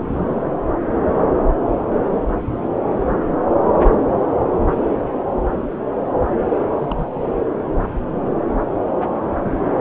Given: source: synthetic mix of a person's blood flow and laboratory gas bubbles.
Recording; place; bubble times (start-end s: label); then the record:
Doppler ultrasound of blood flow; subclavian vein
6.77-7.24 s: bubbles
From the record:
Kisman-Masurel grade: 211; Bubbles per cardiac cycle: several, 3 to 8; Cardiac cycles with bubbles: 1 to 10%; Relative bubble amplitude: barely perceptible (0.100 to 0.250); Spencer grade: 1 (occasional bubble signal discernible with the cardiac motion signal, with majority of cardiac periods free of bubbles); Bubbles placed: anywhere in the cardiac cycle